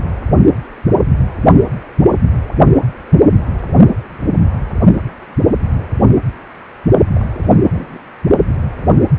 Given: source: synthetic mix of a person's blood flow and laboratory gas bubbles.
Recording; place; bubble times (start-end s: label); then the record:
Doppler ultrasound of blood flow; precordium
7.15-7.25 s: bubbles
7.33-7.58 s: bubbles
7.70-7.98 s: bubbles
From the record:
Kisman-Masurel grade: 211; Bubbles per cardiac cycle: several, 3 to 8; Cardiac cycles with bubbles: 1 to 10%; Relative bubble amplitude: barely perceptible (0.100 to 0.250); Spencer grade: 1 (occasional bubble signal discernible with the cardiac motion signal, with majority of cardiac periods free of bubbles); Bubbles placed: only in the low amplitude regions of the cardiac cycle